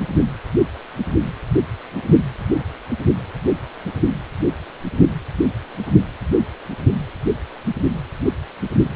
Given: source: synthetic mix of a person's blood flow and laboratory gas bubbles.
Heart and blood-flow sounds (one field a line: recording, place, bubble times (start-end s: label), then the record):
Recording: Doppler ultrasound of blood flow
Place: precordium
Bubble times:
no bubbles
From the record:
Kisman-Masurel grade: 000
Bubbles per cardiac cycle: 0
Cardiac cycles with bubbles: 0%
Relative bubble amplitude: no bubbles discernible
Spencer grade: 0 (complete lack of bubble signals)